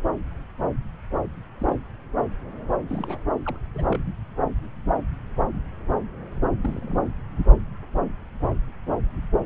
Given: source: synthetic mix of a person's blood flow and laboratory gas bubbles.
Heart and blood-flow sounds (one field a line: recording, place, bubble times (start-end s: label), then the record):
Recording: Doppler ultrasound of blood flow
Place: subclavian vein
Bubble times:
1.60-1.66 s: bubbles
1.68-1.76 s: bubbles
2.89-3.18 s: bubbles
3.45-3.58 s: bubbles
3.74-4.13 s: bubbles
6.62-7.02 s: bubbles
From the record:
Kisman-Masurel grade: 221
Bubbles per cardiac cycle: several, 3 to 8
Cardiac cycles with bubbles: 10 to 50%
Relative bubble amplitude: barely perceptible (0.100 to 0.250)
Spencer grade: 2 (many but less than half of the cardiac periods contain bubble signals, singularly or in groups)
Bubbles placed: anywhere in the cardiac cycle